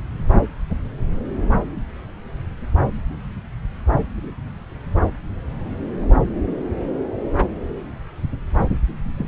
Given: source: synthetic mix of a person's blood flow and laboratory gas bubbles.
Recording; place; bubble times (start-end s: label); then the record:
Doppler ultrasound of blood flow; subclavian vein
9.17-9.28 s: bubbles
From the record:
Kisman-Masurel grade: 211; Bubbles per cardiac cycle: several, 3 to 8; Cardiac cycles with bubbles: 1 to 10%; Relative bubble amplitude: barely perceptible (0.100 to 0.250); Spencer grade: 1 (occasional bubble signal discernible with the cardiac motion signal, with majority of cardiac periods free of bubbles); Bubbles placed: anywhere in the cardiac cycle